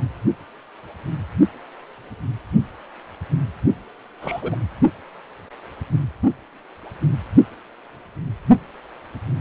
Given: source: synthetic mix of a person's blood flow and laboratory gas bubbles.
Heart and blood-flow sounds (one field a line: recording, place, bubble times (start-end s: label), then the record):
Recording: Doppler ultrasound of blood flow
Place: precordium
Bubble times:
4.21-4.55 s: bubbles
From the record:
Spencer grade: 2 (many but less than half of the cardiac periods contain bubble signals, singularly or in groups)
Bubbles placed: only in the low amplitude regions of the cardiac cycle